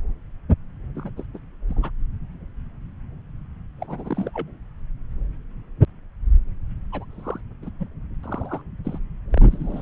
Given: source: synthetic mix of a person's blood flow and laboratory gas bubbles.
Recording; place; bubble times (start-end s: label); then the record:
Doppler ultrasound of blood flow; subclavian vein
0.95-1.10 s: bubbles
1.17-1.23 s: bubbles
1.34-1.39 s: bubbles
1.68-1.90 s: bubbles
3.81-4.31 s: bubbles
4.33-4.47 s: bubbles
6.92-7.05 s: bubbles
7.13-7.39 s: bubbles
7.62-7.70 s: bubbles
7.79-7.88 s: bubbles
8.23-8.62 s: bubbles
8.84-8.99 s: bubbles
9.32-9.82 s: bubbles
From the record:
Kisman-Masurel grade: 221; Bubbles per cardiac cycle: several, 3 to 8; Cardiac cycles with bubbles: 10 to 50%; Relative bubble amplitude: barely perceptible (0.100 to 0.250); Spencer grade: 2 (many but less than half of the cardiac periods contain bubble signals, singularly or in groups); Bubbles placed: anywhere in the cardiac cycle